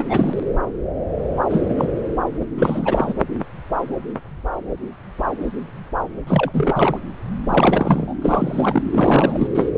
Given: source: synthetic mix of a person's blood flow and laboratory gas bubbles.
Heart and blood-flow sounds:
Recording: Doppler ultrasound of blood flow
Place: subclavian vein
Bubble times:
0.00-0.04 s: bubbles
0.09-0.40 s: bubbles
1.50-1.64 s: bubbles
1.69-1.74 s: bubbles
1.78-1.88 s: bubbles
2.40-2.43 s: bubbles
2.56-3.14 s: bubbles
6.27-6.98 s: bubbles
7.49-8.13 s: bubbles
8.21-8.82 s: bubbles
8.90-9.47 s: bubbles
9.54-9.69 s: bubbles
From the record:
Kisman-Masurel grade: 332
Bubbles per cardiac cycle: rolling drumbeat, 9 or more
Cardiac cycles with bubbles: 50 to 99%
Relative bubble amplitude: moderate (0.250 to 0.450)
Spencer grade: 3 (all of the cardiac periods contain showers or single bubble signals, but not dominating or overriding the cardiac motion signals)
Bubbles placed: anywhere in the cardiac cycle

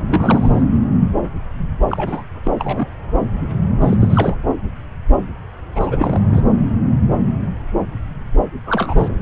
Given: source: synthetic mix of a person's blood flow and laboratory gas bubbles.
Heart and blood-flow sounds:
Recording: Doppler ultrasound of blood flow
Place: subclavian vein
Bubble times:
0.08-0.61 s: bubbles
1.88-2.23 s: bubbles
2.43-2.51 s: bubbles
2.59-2.88 s: bubbles
3.81-3.96 s: bubbles
4.00-4.35 s: bubbles
5.75-6.42 s: bubbles
8.65-9.15 s: bubbles
From the record:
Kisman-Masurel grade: 232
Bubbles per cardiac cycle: several, 3 to 8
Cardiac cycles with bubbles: 50 to 99%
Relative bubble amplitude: moderate (0.250 to 0.450)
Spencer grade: 3 (all of the cardiac periods contain showers or single bubble signals, but not dominating or overriding the cardiac motion signals)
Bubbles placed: anywhere in the cardiac cycle

